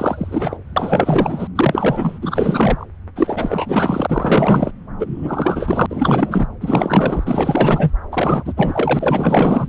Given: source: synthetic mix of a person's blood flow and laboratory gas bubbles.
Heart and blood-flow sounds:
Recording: Doppler ultrasound of blood flow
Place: subclavian vein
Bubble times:
0.00-0.57 s: bubbles
0.76-1.47 s: bubbles
1.55-2.19 s: bubbles
2.21-2.85 s: bubbles
3.15-4.71 s: bubbles
4.99-5.86 s: bubbles
5.89-6.46 s: bubbles
6.60-7.91 s: bubbles
8.12-8.54 s: bubbles
8.57-9.68 s: bubbles
From the record:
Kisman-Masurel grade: 444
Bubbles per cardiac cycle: continuous sound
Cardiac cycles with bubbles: 100%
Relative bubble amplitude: maximal (0.775 to 0.999)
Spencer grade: 4 (maximum detectable bubble signal sounding continuously throughout systole and diastole of every cardiac period, and overriding the amplitude of the normal cardiac signals)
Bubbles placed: anywhere in the cardiac cycle

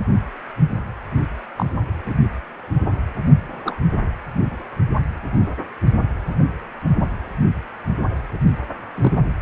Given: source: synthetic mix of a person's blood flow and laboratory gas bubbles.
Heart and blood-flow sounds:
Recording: Doppler ultrasound of blood flow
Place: precordium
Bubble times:
1.56-1.66 s: bubbles
2.06-2.16 s: bubbles
3.66-3.75 s: bubbles
8.95-9.12 s: bubbles
From the record:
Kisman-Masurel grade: 122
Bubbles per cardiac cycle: 1 to 2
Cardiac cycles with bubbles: 10 to 50%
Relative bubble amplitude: moderate (0.250 to 0.450)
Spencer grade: 2 (many but less than half of the cardiac periods contain bubble signals, singularly or in groups)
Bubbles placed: only in the low amplitude regions of the cardiac cycle

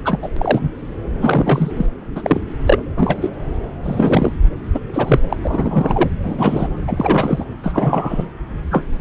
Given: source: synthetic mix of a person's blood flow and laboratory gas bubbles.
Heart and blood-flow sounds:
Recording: Doppler ultrasound of blood flow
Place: subclavian vein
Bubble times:
0.05-0.18 s: bubbles
0.22-0.29 s: bubbles
0.36-0.71 s: bubbles
1.21-1.71 s: bubbles
1.76-1.86 s: bubbles
2.15-2.40 s: bubbles
2.65-2.80 s: bubbles
2.97-3.30 s: bubbles
3.83-4.32 s: bubbles
4.74-4.79 s: bubbles
4.93-5.21 s: bubbles
5.29-5.37 s: bubbles
5.42-6.09 s: bubbles
6.23-6.68 s: bubbles
6.87-7.45 s: bubbles
7.63-8.25 s: bubbles
8.71-8.85 s: bubbles
From the record:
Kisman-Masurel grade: 243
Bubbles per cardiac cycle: several, 3 to 8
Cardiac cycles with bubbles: 100%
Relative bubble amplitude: loud (0.450 to 0.775)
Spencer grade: 3 (all of the cardiac periods contain showers or single bubble signals, but not dominating or overriding the cardiac motion signals)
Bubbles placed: anywhere in the cardiac cycle

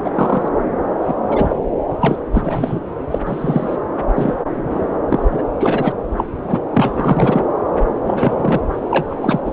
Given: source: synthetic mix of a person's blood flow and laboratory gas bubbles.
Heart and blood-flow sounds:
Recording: Doppler ultrasound of blood flow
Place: subclavian vein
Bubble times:
0.00-0.11 s: bubbles
0.15-0.49 s: bubbles
1.08-1.14 s: bubbles
1.28-1.56 s: bubbles
2.00-2.17 s: bubbles
2.33-2.81 s: bubbles
3.10-3.19 s: bubbles
3.25-3.76 s: bubbles
4.16-4.35 s: bubbles
4.55-4.83 s: bubbles
5.08-5.25 s: bubbles
5.30-5.43 s: bubbles
5.60-5.92 s: bubbles
6.17-6.25 s: bubbles
6.47-6.59 s: bubbles
6.72-7.45 s: bubbles
8.04-8.61 s: bubbles
8.90-9.40 s: bubbles
9.46-9.52 s: bubbles
From the record:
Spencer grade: 3 (all of the cardiac periods contain showers or single bubble signals, but not dominating or overriding the cardiac motion signals)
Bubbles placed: anywhere in the cardiac cycle

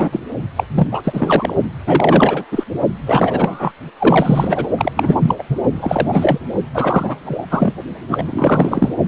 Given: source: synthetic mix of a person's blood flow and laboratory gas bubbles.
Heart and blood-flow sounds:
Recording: Doppler ultrasound of blood flow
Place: precordium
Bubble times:
0.00-0.09 s: bubbles
0.12-0.21 s: bubbles
0.56-0.64 s: bubbles
0.75-0.87 s: bubbles
0.92-1.54 s: bubbles
1.86-2.44 s: bubbles
2.51-2.64 s: bubbles
3.06-3.71 s: bubbles
3.98-4.67 s: bubbles
4.77-4.92 s: bubbles
4.96-5.35 s: bubbles
5.38-5.43 s: bubbles
5.48-5.56 s: bubbles
5.75-6.38 s: bubbles
6.74-7.16 s: bubbles
7.25-7.46 s: bubbles
7.50-7.74 s: bubbles
8.08-8.94 s: bubbles
From the record:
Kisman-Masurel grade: 343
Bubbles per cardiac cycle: rolling drumbeat, 9 or more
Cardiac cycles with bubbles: 100%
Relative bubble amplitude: loud (0.450 to 0.775)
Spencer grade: 3 (all of the cardiac periods contain showers or single bubble signals, but not dominating or overriding the cardiac motion signals)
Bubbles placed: only in the low amplitude regions of the cardiac cycle

